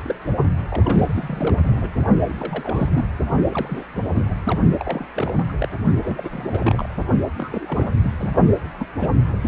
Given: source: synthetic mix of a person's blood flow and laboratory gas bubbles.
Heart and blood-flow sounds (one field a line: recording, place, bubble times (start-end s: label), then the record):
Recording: Doppler ultrasound of blood flow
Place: precordium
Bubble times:
0.00-0.15 s: bubbles
0.69-1.93 s: bubbles
2.29-2.34 s: bubbles
2.40-2.89 s: bubbles
2.94-3.08 s: bubbles
3.49-3.85 s: bubbles
3.94-4.04 s: bubbles
4.14-4.29 s: bubbles
4.44-4.59 s: bubbles
4.77-5.07 s: bubbles
5.16-5.33 s: bubbles
5.36-5.44 s: bubbles
5.48-5.52 s: bubbles
5.58-5.68 s: bubbles
6.02-6.45 s: bubbles
6.51-6.88 s: bubbles
7.38-7.91 s: bubbles
8.04-8.11 s: bubbles
8.18-8.30 s: bubbles
8.78-8.87 s: bubbles
8.97-9.21 s: bubbles
9.29-9.48 s: bubbles
From the record:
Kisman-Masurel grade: 342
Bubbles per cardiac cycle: rolling drumbeat, 9 or more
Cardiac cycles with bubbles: 100%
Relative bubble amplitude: moderate (0.250 to 0.450)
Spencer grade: 3 (all of the cardiac periods contain showers or single bubble signals, but not dominating or overriding the cardiac motion signals)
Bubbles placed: only in the low amplitude regions of the cardiac cycle